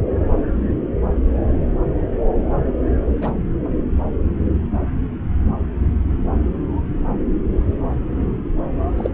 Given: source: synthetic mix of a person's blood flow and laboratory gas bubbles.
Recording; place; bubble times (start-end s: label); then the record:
Doppler ultrasound of blood flow; subclavian vein
3.21-3.33 s: bubbles
8.96-9.10 s: bubbles
From the record:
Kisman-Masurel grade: 122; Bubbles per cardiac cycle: 1 to 2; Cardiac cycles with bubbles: 10 to 50%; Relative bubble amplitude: moderate (0.250 to 0.450); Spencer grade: 2 (many but less than half of the cardiac periods contain bubble signals, singularly or in groups); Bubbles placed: anywhere in the cardiac cycle